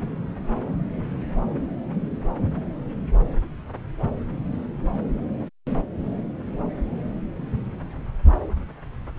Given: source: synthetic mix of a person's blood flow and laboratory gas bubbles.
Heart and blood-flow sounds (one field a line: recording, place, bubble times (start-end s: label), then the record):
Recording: Doppler ultrasound of blood flow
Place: subclavian vein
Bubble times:
no bubbles
From the record:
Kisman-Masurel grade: 000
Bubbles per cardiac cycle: 0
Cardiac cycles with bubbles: 0%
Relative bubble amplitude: no bubbles discernible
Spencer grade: 0 (complete lack of bubble signals)